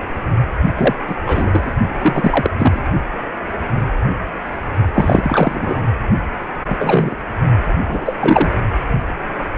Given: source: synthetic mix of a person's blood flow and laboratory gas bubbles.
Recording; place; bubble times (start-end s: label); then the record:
Doppler ultrasound of blood flow; precordium
0.76-0.95 s: bubbles
1.07-1.16 s: bubbles
1.24-1.72 s: bubbles
2.01-2.50 s: bubbles
2.59-2.82 s: bubbles
4.94-5.84 s: bubbles
6.69-6.76 s: bubbles
6.80-7.15 s: bubbles
7.88-8.16 s: bubbles
8.19-8.50 s: bubbles
From the record:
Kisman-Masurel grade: 233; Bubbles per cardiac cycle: several, 3 to 8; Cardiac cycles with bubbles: 50 to 99%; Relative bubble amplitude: loud (0.450 to 0.775); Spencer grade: 3 (all of the cardiac periods contain showers or single bubble signals, but not dominating or overriding the cardiac motion signals); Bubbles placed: only in the low amplitude regions of the cardiac cycle